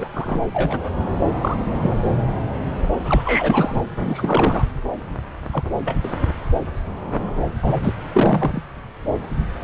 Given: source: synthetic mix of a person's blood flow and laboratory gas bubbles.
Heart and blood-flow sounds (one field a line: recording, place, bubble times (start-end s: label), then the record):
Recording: Doppler ultrasound of blood flow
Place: subclavian vein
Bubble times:
0.00-0.08 s: bubbles
0.14-0.41 s: bubbles
0.53-0.85 s: bubbles
1.41-2.04 s: bubbles
3.04-3.75 s: bubbles
4.00-4.66 s: bubbles
5.52-5.63 s: bubbles
5.85-5.96 s: bubbles
6.03-6.16 s: bubbles
7.62-7.95 s: bubbles
8.12-8.62 s: bubbles
From the record:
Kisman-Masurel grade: 232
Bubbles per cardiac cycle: several, 3 to 8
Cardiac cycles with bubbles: 50 to 99%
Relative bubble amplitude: moderate (0.250 to 0.450)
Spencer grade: 3 (all of the cardiac periods contain showers or single bubble signals, but not dominating or overriding the cardiac motion signals)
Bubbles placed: anywhere in the cardiac cycle